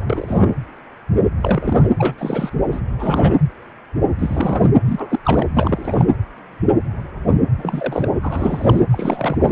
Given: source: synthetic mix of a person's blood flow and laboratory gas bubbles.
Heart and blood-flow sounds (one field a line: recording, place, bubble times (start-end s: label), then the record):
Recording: Doppler ultrasound of blood flow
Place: precordium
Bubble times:
0.10-0.52 s: bubbles
1.41-1.89 s: bubbles
1.96-2.14 s: bubbles
2.18-2.50 s: bubbles
2.71-2.80 s: bubbles
2.98-3.38 s: bubbles
4.19-4.70 s: bubbles
4.84-5.19 s: bubbles
5.25-5.48 s: bubbles
5.53-6.06 s: bubbles
7.56-8.09 s: bubbles
8.21-8.83 s: bubbles
8.90-9.52 s: bubbles
From the record:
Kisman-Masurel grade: 332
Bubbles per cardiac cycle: rolling drumbeat, 9 or more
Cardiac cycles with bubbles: 50 to 99%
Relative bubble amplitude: moderate (0.250 to 0.450)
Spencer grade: 3 (all of the cardiac periods contain showers or single bubble signals, but not dominating or overriding the cardiac motion signals)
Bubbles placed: anywhere in the cardiac cycle